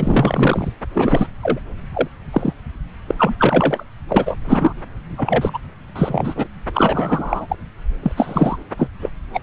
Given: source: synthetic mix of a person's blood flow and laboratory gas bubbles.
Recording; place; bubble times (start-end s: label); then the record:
Doppler ultrasound of blood flow; subclavian vein
0.00-0.69 s: bubbles
0.94-1.27 s: bubbles
1.43-1.59 s: bubbles
1.94-2.08 s: bubbles
2.32-2.53 s: bubbles
3.07-3.15 s: bubbles
3.18-3.34 s: bubbles
3.38-3.83 s: bubbles
4.08-4.37 s: bubbles
4.46-4.73 s: bubbles
5.17-5.58 s: bubbles
5.96-6.47 s: bubbles
6.74-7.56 s: bubbles
8.02-8.12 s: bubbles
8.16-8.57 s: bubbles
8.77-8.88 s: bubbles
9.00-9.10 s: bubbles
9.33-9.41 s: bubbles
From the record:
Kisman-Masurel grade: 343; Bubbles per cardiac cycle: rolling drumbeat, 9 or more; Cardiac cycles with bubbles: 100%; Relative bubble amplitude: loud (0.450 to 0.775); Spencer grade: 3 (all of the cardiac periods contain showers or single bubble signals, but not dominating or overriding the cardiac motion signals); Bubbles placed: anywhere in the cardiac cycle